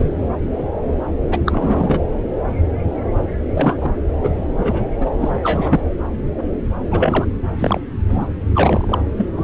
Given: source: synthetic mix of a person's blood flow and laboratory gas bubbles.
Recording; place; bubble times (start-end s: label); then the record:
Doppler ultrasound of blood flow; subclavian vein
0.00-0.05 s: bubbles
1.29-1.38 s: bubbles
1.46-2.00 s: bubbles
3.52-3.77 s: bubbles
3.80-3.92 s: bubbles
4.23-4.35 s: bubbles
4.58-4.84 s: bubbles
5.00-5.10 s: bubbles
5.18-5.41 s: bubbles
5.44-5.81 s: bubbles
6.91-7.26 s: bubbles
7.59-7.81 s: bubbles
8.09-8.28 s: bubbles
8.54-8.99 s: bubbles
9.17-9.28 s: bubbles
9.36-9.44 s: bubbles
From the record:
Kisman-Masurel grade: 232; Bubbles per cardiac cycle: several, 3 to 8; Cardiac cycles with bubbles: 50 to 99%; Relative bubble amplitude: moderate (0.250 to 0.450); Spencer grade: 3 (all of the cardiac periods contain showers or single bubble signals, but not dominating or overriding the cardiac motion signals); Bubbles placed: anywhere in the cardiac cycle